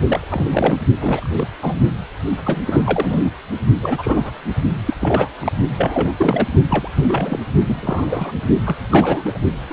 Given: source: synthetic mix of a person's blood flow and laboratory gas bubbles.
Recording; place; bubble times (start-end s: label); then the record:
Doppler ultrasound of blood flow; precordium
0.04-0.78 s: bubbles
0.99-1.29 s: bubbles
1.33-1.48 s: bubbles
1.62-1.80 s: bubbles
2.45-3.29 s: bubbles
3.82-4.33 s: bubbles
4.86-4.96 s: bubbles
5.01-5.29 s: bubbles
5.40-5.53 s: bubbles
5.73-6.12 s: bubbles
6.18-6.48 s: bubbles
6.70-6.88 s: bubbles
6.95-7.39 s: bubbles
7.67-8.33 s: bubbles
8.65-8.76 s: bubbles
8.91-9.38 s: bubbles
9.69-9.73 s: bubbles
From the record:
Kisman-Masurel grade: 242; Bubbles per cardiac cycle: several, 3 to 8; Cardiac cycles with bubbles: 100%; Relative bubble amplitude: moderate (0.250 to 0.450); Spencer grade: 3 (all of the cardiac periods contain showers or single bubble signals, but not dominating or overriding the cardiac motion signals); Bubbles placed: only in the low amplitude regions of the cardiac cycle